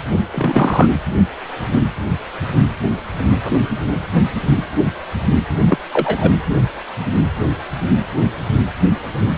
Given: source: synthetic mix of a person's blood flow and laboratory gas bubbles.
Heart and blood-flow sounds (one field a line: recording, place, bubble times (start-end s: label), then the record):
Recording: Doppler ultrasound of blood flow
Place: precordium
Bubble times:
0.32-0.86 s: bubbles
5.68-5.78 s: bubbles
5.93-6.31 s: bubbles
From the record:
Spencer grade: 2 (many but less than half of the cardiac periods contain bubble signals, singularly or in groups)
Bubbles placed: anywhere in the cardiac cycle